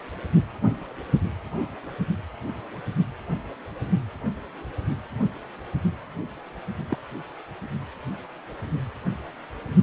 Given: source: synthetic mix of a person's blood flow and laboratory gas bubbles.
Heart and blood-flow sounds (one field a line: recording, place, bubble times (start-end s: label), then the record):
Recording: Doppler ultrasound of blood flow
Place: precordium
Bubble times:
6.89-6.98 s: bubbles
From the record:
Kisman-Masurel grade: 111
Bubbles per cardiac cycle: 1 to 2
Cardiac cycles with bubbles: 1 to 10%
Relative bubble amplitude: barely perceptible (0.100 to 0.250)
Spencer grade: 1 (occasional bubble signal discernible with the cardiac motion signal, with majority of cardiac periods free of bubbles)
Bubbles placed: only in the low amplitude regions of the cardiac cycle